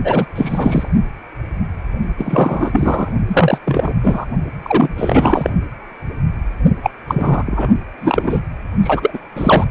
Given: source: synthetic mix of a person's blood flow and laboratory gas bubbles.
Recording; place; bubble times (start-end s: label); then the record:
Doppler ultrasound of blood flow; precordium
0.04-0.26 s: bubbles
0.36-0.89 s: bubbles
2.18-3.12 s: bubbles
3.27-3.58 s: bubbles
3.65-4.00 s: bubbles
4.03-4.25 s: bubbles
4.62-4.89 s: bubbles
4.96-5.50 s: bubbles
6.83-6.91 s: bubbles
7.08-7.43 s: bubbles
7.46-7.74 s: bubbles
8.01-8.40 s: bubbles
8.83-9.18 s: bubbles
9.35-9.64 s: bubbles
From the record:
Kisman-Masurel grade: 333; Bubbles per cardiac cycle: rolling drumbeat, 9 or more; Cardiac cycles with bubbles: 50 to 99%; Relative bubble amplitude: loud (0.450 to 0.775); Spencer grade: 3 (all of the cardiac periods contain showers or single bubble signals, but not dominating or overriding the cardiac motion signals); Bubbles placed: only in the low amplitude regions of the cardiac cycle